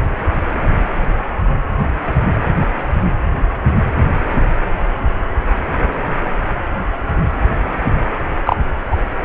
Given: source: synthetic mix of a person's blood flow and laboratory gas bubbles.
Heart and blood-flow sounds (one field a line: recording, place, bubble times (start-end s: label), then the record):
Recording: Doppler ultrasound of blood flow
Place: precordium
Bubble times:
8.45-8.56 s: bubbles
8.91-8.97 s: bubbles
From the record:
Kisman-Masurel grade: 123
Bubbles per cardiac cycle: 1 to 2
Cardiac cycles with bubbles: 10 to 50%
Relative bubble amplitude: loud (0.450 to 0.775)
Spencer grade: 2 (many but less than half of the cardiac periods contain bubble signals, singularly or in groups)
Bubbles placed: anywhere in the cardiac cycle